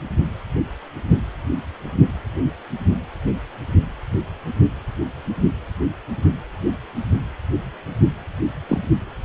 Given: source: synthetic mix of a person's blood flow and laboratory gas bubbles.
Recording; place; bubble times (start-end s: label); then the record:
Doppler ultrasound of blood flow; precordium
8.69-8.79 s: bubbles
From the record:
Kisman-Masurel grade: 112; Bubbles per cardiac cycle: 1 to 2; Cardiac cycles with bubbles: 1 to 10%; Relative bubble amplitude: moderate (0.250 to 0.450); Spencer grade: 1 (occasional bubble signal discernible with the cardiac motion signal, with majority of cardiac periods free of bubbles); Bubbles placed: anywhere in the cardiac cycle